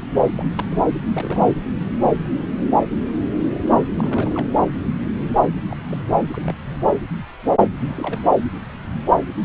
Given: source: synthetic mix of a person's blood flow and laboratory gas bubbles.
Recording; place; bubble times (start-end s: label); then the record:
Doppler ultrasound of blood flow; subclavian vein
0.35-0.47 s: bubbles
0.57-0.65 s: bubbles
0.71-0.81 s: bubbles
1.14-1.47 s: bubbles
3.98-4.49 s: bubbles
5.40-5.49 s: bubbles
5.68-5.77 s: bubbles
5.88-6.02 s: bubbles
6.33-6.57 s: bubbles
7.88-8.21 s: bubbles
From the record:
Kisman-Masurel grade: 221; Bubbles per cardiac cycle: several, 3 to 8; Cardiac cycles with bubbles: 10 to 50%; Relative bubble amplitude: barely perceptible (0.100 to 0.250); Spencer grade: 2 (many but less than half of the cardiac periods contain bubble signals, singularly or in groups); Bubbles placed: anywhere in the cardiac cycle